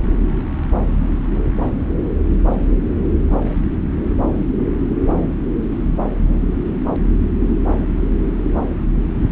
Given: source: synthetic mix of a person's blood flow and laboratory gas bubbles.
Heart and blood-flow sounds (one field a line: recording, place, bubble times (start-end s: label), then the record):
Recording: Doppler ultrasound of blood flow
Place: subclavian vein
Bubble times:
no bubbles
From the record:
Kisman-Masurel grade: 000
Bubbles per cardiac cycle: 0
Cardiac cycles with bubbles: 0%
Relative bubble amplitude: no bubbles discernible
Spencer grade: 0 (complete lack of bubble signals)